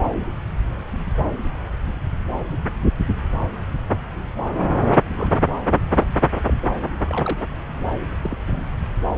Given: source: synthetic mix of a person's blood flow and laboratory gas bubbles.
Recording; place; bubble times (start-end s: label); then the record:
Doppler ultrasound of blood flow; subclavian vein
5.16-5.31 s: bubbles
6.46-6.53 s: bubbles
7.05-7.46 s: bubbles
8.21-8.38 s: bubbles
8.46-8.76 s: bubbles
From the record:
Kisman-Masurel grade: 121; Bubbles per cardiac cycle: 1 to 2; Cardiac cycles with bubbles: 10 to 50%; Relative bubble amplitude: barely perceptible (0.100 to 0.250); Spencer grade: 2 (many but less than half of the cardiac periods contain bubble signals, singularly or in groups); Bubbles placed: anywhere in the cardiac cycle